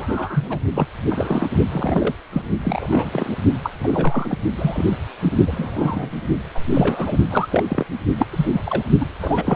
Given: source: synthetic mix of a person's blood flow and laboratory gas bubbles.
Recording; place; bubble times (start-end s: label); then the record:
Doppler ultrasound of blood flow; precordium
0.00-0.59 s: bubbles
0.75-0.88 s: bubbles
1.09-1.47 s: bubbles
1.72-2.15 s: bubbles
2.32-2.42 s: bubbles
2.64-3.35 s: bubbles
3.62-3.71 s: bubbles
3.80-4.38 s: bubbles
4.56-4.96 s: bubbles
5.22-5.38 s: bubbles
5.46-6.10 s: bubbles
6.54-6.61 s: bubbles
6.73-7.17 s: bubbles
7.29-7.47 s: bubbles
7.50-7.64 s: bubbles
7.68-7.86 s: bubbles
8.18-8.27 s: bubbles
8.31-8.61 s: bubbles
8.64-8.84 s: bubbles
9.00-9.07 s: bubbles
9.21-9.56 s: bubbles
From the record:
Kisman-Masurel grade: 242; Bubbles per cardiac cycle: several, 3 to 8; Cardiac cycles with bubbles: 100%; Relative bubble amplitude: moderate (0.250 to 0.450); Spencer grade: 3 (all of the cardiac periods contain showers or single bubble signals, but not dominating or overriding the cardiac motion signals); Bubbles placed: only in the low amplitude regions of the cardiac cycle